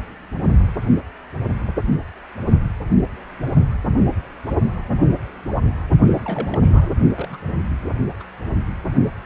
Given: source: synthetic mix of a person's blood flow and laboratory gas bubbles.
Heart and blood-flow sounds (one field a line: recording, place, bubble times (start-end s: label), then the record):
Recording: Doppler ultrasound of blood flow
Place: precordium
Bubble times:
6.06-6.91 s: bubbles
7.17-7.36 s: bubbles
8.20-8.23 s: bubbles
From the record:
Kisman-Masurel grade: 221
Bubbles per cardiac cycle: several, 3 to 8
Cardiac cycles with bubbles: 10 to 50%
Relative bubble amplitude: barely perceptible (0.100 to 0.250)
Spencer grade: 2 (many but less than half of the cardiac periods contain bubble signals, singularly or in groups)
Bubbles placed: only in the low amplitude regions of the cardiac cycle